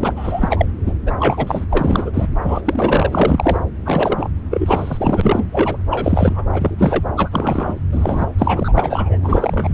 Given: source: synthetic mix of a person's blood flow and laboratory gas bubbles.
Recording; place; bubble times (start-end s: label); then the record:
Doppler ultrasound of blood flow; subclavian vein
0.00-0.13 s: bubbles
0.16-0.66 s: bubbles
0.86-0.93 s: bubbles
1.06-1.12 s: bubbles
1.19-1.65 s: bubbles
1.71-2.11 s: bubbles
2.14-2.28 s: bubbles
2.44-2.62 s: bubbles
2.65-3.60 s: bubbles
3.85-4.30 s: bubbles
4.50-5.47 s: bubbles
5.51-5.76 s: bubbles
5.90-6.45 s: bubbles
6.52-6.75 s: bubbles
6.78-7.04 s: bubbles
7.17-7.29 s: bubbles
7.32-7.75 s: bubbles
7.92-8.26 s: bubbles
8.38-8.72 s: bubbles
8.76-9.18 s: bubbles
9.22-9.74 s: bubbles
From the record:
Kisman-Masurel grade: 343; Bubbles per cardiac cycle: rolling drumbeat, 9 or more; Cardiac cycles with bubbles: 100%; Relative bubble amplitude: loud (0.450 to 0.775); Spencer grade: 3 (all of the cardiac periods contain showers or single bubble signals, but not dominating or overriding the cardiac motion signals); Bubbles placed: anywhere in the cardiac cycle